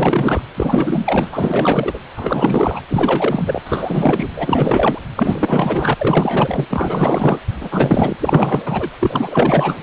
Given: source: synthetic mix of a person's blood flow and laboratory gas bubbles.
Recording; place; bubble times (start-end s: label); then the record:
Doppler ultrasound of blood flow; precordium
0.00-0.42 s: bubbles
0.55-1.99 s: bubbles
2.17-2.80 s: bubbles
2.90-3.62 s: bubbles
3.66-4.29 s: bubbles
4.36-4.99 s: bubbles
5.16-5.95 s: bubbles
5.99-6.65 s: bubbles
6.70-7.40 s: bubbles
7.61-8.17 s: bubbles
8.20-8.88 s: bubbles
9.00-9.77 s: bubbles
From the record:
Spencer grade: 4 (maximum detectable bubble signal sounding continuously throughout systole and diastole of every cardiac period, and overriding the amplitude of the normal cardiac signals); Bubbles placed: anywhere in the cardiac cycle